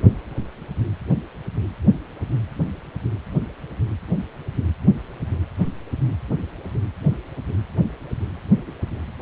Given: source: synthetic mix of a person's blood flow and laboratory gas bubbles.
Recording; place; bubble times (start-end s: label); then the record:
Doppler ultrasound of blood flow; precordium
8.66-8.74 s: bubbles
From the record:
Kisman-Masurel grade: 111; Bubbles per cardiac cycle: 1 to 2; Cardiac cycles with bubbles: 1 to 10%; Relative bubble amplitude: barely perceptible (0.100 to 0.250); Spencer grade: 1 (occasional bubble signal discernible with the cardiac motion signal, with majority of cardiac periods free of bubbles); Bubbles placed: anywhere in the cardiac cycle